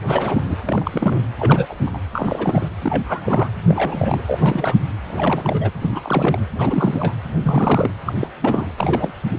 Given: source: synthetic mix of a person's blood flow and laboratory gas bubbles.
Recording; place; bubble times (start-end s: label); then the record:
Doppler ultrasound of blood flow; precordium
0.07-0.42 s: bubbles
0.46-0.55 s: bubbles
0.66-1.21 s: bubbles
1.39-1.76 s: bubbles
1.80-1.91 s: bubbles
1.93-1.98 s: bubbles
2.12-2.68 s: bubbles
2.82-3.48 s: bubbles
3.68-4.21 s: bubbles
4.26-4.38 s: bubbles
4.41-4.75 s: bubbles
5.07-5.71 s: bubbles
5.80-6.38 s: bubbles
6.56-7.14 s: bubbles
7.42-7.91 s: bubbles
8.06-8.29 s: bubbles
8.42-8.67 s: bubbles
8.77-9.12 s: bubbles
9.29-9.39 s: bubbles
From the record:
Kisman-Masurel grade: 342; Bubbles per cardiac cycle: rolling drumbeat, 9 or more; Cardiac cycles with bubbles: 100%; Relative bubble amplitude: moderate (0.250 to 0.450); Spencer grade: 3 (all of the cardiac periods contain showers or single bubble signals, but not dominating or overriding the cardiac motion signals); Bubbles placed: anywhere in the cardiac cycle